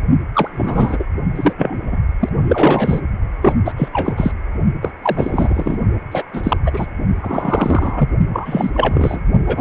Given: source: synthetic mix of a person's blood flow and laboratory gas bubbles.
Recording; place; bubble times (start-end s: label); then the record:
Doppler ultrasound of blood flow; precordium
0.35-0.49 s: bubbles
0.52-1.04 s: bubbles
1.35-1.53 s: bubbles
1.58-1.79 s: bubbles
1.82-1.96 s: bubbles
2.20-2.29 s: bubbles
2.44-3.00 s: bubbles
3.42-3.53 s: bubbles
3.65-3.73 s: bubbles
3.77-3.89 s: bubbles
3.93-4.32 s: bubbles
4.82-4.91 s: bubbles
5.03-5.78 s: bubbles
6.11-6.24 s: bubbles
6.33-6.57 s: bubbles
6.65-6.87 s: bubbles
7.22-8.09 s: bubbles
8.33-8.71 s: bubbles
8.73-9.21 s: bubbles
9.46-9.61 s: bubbles
From the record:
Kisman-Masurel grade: 333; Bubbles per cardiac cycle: rolling drumbeat, 9 or more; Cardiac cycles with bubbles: 50 to 99%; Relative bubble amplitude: loud (0.450 to 0.775); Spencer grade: 3 (all of the cardiac periods contain showers or single bubble signals, but not dominating or overriding the cardiac motion signals); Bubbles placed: only in the low amplitude regions of the cardiac cycle